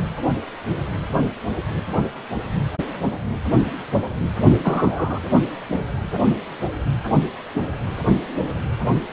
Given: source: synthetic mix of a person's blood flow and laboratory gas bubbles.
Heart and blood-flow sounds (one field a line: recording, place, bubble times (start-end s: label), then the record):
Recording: Doppler ultrasound of blood flow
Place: precordium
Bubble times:
4.63-5.20 s: bubbles
From the record:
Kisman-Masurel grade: 123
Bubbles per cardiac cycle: 1 to 2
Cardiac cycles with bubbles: 10 to 50%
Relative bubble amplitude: loud (0.450 to 0.775)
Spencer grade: 2 (many but less than half of the cardiac periods contain bubble signals, singularly or in groups)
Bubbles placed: only in the low amplitude regions of the cardiac cycle